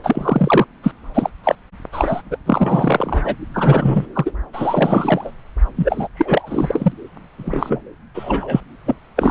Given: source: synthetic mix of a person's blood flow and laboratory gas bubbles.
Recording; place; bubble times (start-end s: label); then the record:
Doppler ultrasound of blood flow; subclavian vein
0.03-0.66 s: bubbles
0.83-0.92 s: bubbles
1.14-1.30 s: bubbles
1.44-1.55 s: bubbles
1.92-2.21 s: bubbles
2.30-2.38 s: bubbles
2.46-3.36 s: bubbles
3.54-4.07 s: bubbles
4.13-4.32 s: bubbles
4.53-5.32 s: bubbles
5.76-6.08 s: bubbles
6.15-6.92 s: bubbles
7.38-7.83 s: bubbles
8.14-8.61 s: bubbles
8.86-8.96 s: bubbles
9.16-9.31 s: bubbles
From the record:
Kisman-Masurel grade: 343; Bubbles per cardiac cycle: rolling drumbeat, 9 or more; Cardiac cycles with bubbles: 100%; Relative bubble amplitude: loud (0.450 to 0.775); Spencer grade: 3 (all of the cardiac periods contain showers or single bubble signals, but not dominating or overriding the cardiac motion signals); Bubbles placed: anywhere in the cardiac cycle